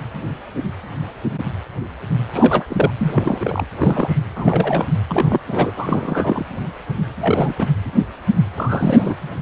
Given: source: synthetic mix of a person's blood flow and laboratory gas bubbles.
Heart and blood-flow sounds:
Doppler ultrasound of blood flow; precordium
2.33-2.66 s: bubbles
2.69-2.90 s: bubbles
2.98-3.65 s: bubbles
3.79-4.18 s: bubbles
4.35-4.88 s: bubbles
5.08-5.40 s: bubbles
5.47-5.71 s: bubbles
5.76-6.45 s: bubbles
7.21-7.54 s: bubbles
7.58-7.67 s: bubbles
8.54-9.14 s: bubbles
From the record:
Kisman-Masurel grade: 332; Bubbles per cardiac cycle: rolling drumbeat, 9 or more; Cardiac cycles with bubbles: 50 to 99%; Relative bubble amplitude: moderate (0.250 to 0.450); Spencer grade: 3 (all of the cardiac periods contain showers or single bubble signals, but not dominating or overriding the cardiac motion signals); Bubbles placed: anywhere in the cardiac cycle

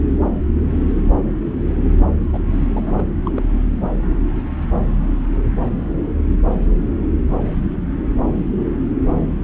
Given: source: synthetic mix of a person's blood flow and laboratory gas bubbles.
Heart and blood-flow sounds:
Doppler ultrasound of blood flow; subclavian vein
2.33-2.41 s: bubbles
2.51-2.67 s: bubbles
2.74-3.03 s: bubbles
3.25-3.31 s: bubbles
3.34-3.42 s: bubbles
From the record:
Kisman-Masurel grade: 211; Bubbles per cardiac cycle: several, 3 to 8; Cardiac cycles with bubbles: 1 to 10%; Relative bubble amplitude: barely perceptible (0.100 to 0.250); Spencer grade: 1 (occasional bubble signal discernible with the cardiac motion signal, with majority of cardiac periods free of bubbles); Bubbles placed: anywhere in the cardiac cycle

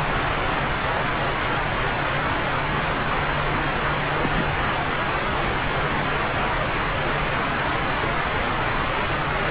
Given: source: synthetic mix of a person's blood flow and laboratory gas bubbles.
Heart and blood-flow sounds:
Doppler ultrasound of blood flow; subclavian vein
4.20-4.43 s: bubbles
From the record:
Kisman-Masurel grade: 111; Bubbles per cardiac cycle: 1 to 2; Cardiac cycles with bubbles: 1 to 10%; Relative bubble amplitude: barely perceptible (0.100 to 0.250); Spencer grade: 1 (occasional bubble signal discernible with the cardiac motion signal, with majority of cardiac periods free of bubbles); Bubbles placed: anywhere in the cardiac cycle

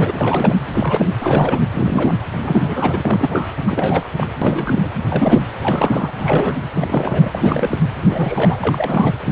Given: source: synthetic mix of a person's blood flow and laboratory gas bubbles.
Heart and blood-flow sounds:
Doppler ultrasound of blood flow; precordium
0.00-0.55 s: bubbles
0.73-1.07 s: bubbles
1.21-1.62 s: bubbles
1.74-2.12 s: bubbles
2.40-3.47 s: bubbles
3.67-4.10 s: bubbles
4.17-4.27 s: bubbles
4.41-4.91 s: bubbles
5.10-5.43 s: bubbles
5.60-6.12 s: bubbles
6.18-6.55 s: bubbles
6.73-7.31 s: bubbles
7.34-7.78 s: bubbles
8.01-9.12 s: bubbles
9.24-9.32 s: bubbles
From the record:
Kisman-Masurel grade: 342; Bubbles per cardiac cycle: rolling drumbeat, 9 or more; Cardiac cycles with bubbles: 100%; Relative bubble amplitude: moderate (0.250 to 0.450); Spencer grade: 3 (all of the cardiac periods contain showers or single bubble signals, but not dominating or overriding the cardiac motion signals); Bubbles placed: anywhere in the cardiac cycle

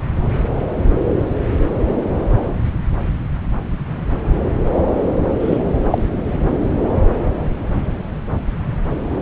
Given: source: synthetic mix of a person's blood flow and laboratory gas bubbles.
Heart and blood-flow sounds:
Doppler ultrasound of blood flow; subclavian vein
5.39-5.59 s: bubbles
5.87-5.98 s: bubbles
From the record:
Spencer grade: 1 (occasional bubble signal discernible with the cardiac motion signal, with majority of cardiac periods free of bubbles); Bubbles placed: anywhere in the cardiac cycle

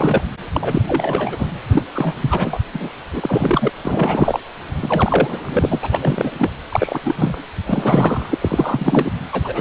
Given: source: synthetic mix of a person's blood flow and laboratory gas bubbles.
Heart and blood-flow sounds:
Doppler ultrasound of blood flow; precordium
0.00-0.24 s: bubbles
0.51-0.82 s: bubbles
0.87-1.50 s: bubbles
1.70-1.83 s: bubbles
1.95-2.16 s: bubbles
2.18-2.58 s: bubbles
2.73-2.90 s: bubbles
3.12-3.69 s: bubbles
3.81-4.40 s: bubbles
4.81-6.30 s: bubbles
6.34-6.49 s: bubbles
6.71-7.43 s: bubbles
7.67-8.38 s: bubbles
8.40-9.11 s: bubbles
9.32-9.61 s: bubbles
From the record:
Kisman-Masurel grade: 343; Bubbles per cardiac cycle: rolling drumbeat, 9 or more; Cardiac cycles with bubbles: 100%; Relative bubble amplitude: loud (0.450 to 0.775); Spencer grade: 3 (all of the cardiac periods contain showers or single bubble signals, but not dominating or overriding the cardiac motion signals); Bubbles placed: anywhere in the cardiac cycle

